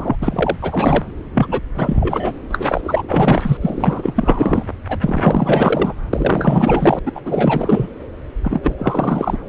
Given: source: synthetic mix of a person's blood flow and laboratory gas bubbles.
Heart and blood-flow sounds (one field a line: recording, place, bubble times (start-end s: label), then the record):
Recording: Doppler ultrasound of blood flow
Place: subclavian vein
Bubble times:
0.00-0.17 s: bubbles
0.21-0.56 s: bubbles
0.62-1.04 s: bubbles
1.34-1.60 s: bubbles
1.74-2.33 s: bubbles
2.52-2.81 s: bubbles
2.83-3.02 s: bubbles
3.08-3.57 s: bubbles
3.61-4.65 s: bubbles
4.88-5.94 s: bubbles
6.13-6.99 s: bubbles
7.05-7.12 s: bubbles
7.15-7.21 s: bubbles
7.25-7.88 s: bubbles
8.43-9.38 s: bubbles
From the record:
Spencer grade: 4 (maximum detectable bubble signal sounding continuously throughout systole and diastole of every cardiac period, and overriding the amplitude of the normal cardiac signals)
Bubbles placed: anywhere in the cardiac cycle